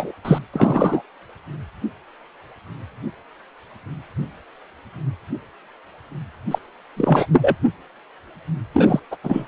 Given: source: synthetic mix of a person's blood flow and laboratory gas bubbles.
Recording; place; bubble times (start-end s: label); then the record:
Doppler ultrasound of blood flow; precordium
0.00-0.13 s: bubbles
0.24-0.39 s: bubbles
0.53-1.02 s: bubbles
6.50-6.58 s: bubbles
6.96-7.26 s: bubbles
7.32-7.56 s: bubbles
8.73-8.99 s: bubbles
9.11-9.16 s: bubbles
9.23-9.48 s: bubbles
From the record:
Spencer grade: 2 (many but less than half of the cardiac periods contain bubble signals, singularly or in groups); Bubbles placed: anywhere in the cardiac cycle